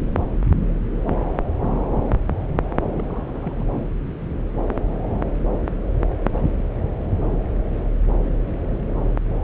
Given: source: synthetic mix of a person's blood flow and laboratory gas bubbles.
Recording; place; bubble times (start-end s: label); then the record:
Doppler ultrasound of blood flow; subclavian vein
2.97-3.04 s: bubbles
3.07-3.65 s: bubbles
From the record:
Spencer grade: 1 (occasional bubble signal discernible with the cardiac motion signal, with majority of cardiac periods free of bubbles); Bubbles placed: anywhere in the cardiac cycle